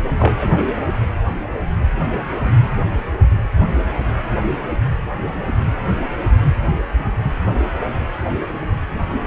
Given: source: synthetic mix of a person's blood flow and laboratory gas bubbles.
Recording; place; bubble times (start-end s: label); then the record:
Doppler ultrasound of blood flow; precordium
0.18-0.65 s: bubbles
From the record:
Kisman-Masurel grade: 113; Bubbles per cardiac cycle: 1 to 2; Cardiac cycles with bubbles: 1 to 10%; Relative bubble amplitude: loud (0.450 to 0.775); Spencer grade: 1 (occasional bubble signal discernible with the cardiac motion signal, with majority of cardiac periods free of bubbles); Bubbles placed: anywhere in the cardiac cycle